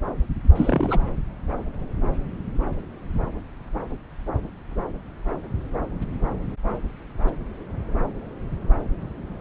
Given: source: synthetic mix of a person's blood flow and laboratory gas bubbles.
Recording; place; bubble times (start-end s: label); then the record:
Doppler ultrasound of blood flow; subclavian vein
0.55-0.99 s: bubbles
From the record:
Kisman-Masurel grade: 211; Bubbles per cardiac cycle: several, 3 to 8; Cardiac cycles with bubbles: 1 to 10%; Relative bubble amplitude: barely perceptible (0.100 to 0.250); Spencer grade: 1 (occasional bubble signal discernible with the cardiac motion signal, with majority of cardiac periods free of bubbles); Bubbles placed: anywhere in the cardiac cycle